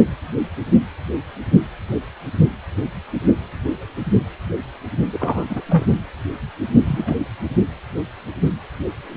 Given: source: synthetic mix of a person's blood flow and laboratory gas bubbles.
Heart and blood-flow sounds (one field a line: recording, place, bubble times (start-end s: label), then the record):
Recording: Doppler ultrasound of blood flow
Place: precordium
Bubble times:
5.12-5.46 s: bubbles
5.50-5.61 s: bubbles
5.67-5.86 s: bubbles
6.85-7.25 s: bubbles
From the record:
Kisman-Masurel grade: 212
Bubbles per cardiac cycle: several, 3 to 8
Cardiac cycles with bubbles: 1 to 10%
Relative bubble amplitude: moderate (0.250 to 0.450)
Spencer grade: 1 (occasional bubble signal discernible with the cardiac motion signal, with majority of cardiac periods free of bubbles)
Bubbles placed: only in the low amplitude regions of the cardiac cycle